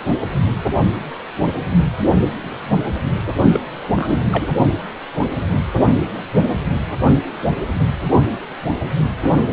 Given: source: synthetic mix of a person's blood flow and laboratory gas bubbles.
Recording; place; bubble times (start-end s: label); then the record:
Doppler ultrasound of blood flow; precordium
3.51-3.60 s: bubbles
3.95-4.29 s: bubbles
4.32-4.46 s: bubbles
From the record:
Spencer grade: 1 (occasional bubble signal discernible with the cardiac motion signal, with majority of cardiac periods free of bubbles); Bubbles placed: only in the low amplitude regions of the cardiac cycle